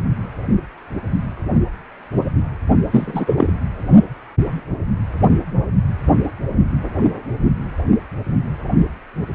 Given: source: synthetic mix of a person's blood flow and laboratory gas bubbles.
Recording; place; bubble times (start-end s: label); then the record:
Doppler ultrasound of blood flow; precordium
2.92-3.53 s: bubbles
From the record:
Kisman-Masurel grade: 213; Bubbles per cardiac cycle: several, 3 to 8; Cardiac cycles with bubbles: 1 to 10%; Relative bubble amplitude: loud (0.450 to 0.775); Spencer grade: 1 (occasional bubble signal discernible with the cardiac motion signal, with majority of cardiac periods free of bubbles); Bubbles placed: anywhere in the cardiac cycle